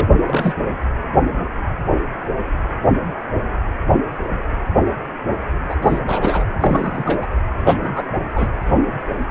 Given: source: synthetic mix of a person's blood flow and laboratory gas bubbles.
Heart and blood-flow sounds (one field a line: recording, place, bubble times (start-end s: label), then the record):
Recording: Doppler ultrasound of blood flow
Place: precordium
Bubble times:
0.00-0.08 s: bubbles
0.26-0.53 s: bubbles
5.68-5.75 s: bubbles
5.82-6.00 s: bubbles
6.07-6.44 s: bubbles
6.58-7.26 s: bubbles
7.57-8.09 s: bubbles
8.34-8.47 s: bubbles
From the record:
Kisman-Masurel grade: 222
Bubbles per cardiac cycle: several, 3 to 8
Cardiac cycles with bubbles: 10 to 50%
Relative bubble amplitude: moderate (0.250 to 0.450)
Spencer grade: 2 (many but less than half of the cardiac periods contain bubble signals, singularly or in groups)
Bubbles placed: anywhere in the cardiac cycle